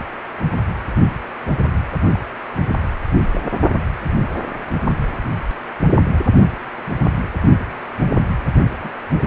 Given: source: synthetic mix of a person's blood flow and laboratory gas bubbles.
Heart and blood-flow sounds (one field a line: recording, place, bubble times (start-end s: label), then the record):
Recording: Doppler ultrasound of blood flow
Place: precordium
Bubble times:
2.14-2.18 s: bubbles
3.33-3.45 s: bubbles
8.81-8.89 s: bubbles
9.10-9.27 s: bubbles
From the record:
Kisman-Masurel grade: 121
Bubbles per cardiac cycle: 1 to 2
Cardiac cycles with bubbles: 10 to 50%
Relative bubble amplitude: barely perceptible (0.100 to 0.250)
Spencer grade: 2 (many but less than half of the cardiac periods contain bubble signals, singularly or in groups)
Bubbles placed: anywhere in the cardiac cycle